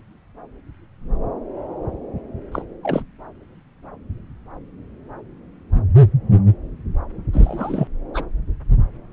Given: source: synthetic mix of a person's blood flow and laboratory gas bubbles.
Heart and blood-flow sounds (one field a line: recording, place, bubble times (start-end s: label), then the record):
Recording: Doppler ultrasound of blood flow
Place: subclavian vein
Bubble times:
2.51-2.62 s: bubbles
2.83-3.03 s: bubbles
7.33-7.88 s: bubbles
8.14-8.23 s: bubbles
From the record:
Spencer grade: 2 (many but less than half of the cardiac periods contain bubble signals, singularly or in groups)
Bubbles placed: anywhere in the cardiac cycle